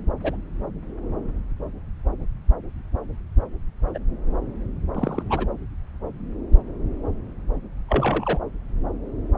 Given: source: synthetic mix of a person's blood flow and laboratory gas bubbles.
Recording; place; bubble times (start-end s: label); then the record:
Doppler ultrasound of blood flow; subclavian vein
0.22-0.35 s: bubbles
3.94-3.98 s: bubbles
4.95-5.23 s: bubbles
5.29-5.46 s: bubbles
7.88-8.38 s: bubbles
From the record:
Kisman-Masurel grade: 122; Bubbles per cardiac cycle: 1 to 2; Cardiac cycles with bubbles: 10 to 50%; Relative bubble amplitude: moderate (0.250 to 0.450); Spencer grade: 2 (many but less than half of the cardiac periods contain bubble signals, singularly or in groups); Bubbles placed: anywhere in the cardiac cycle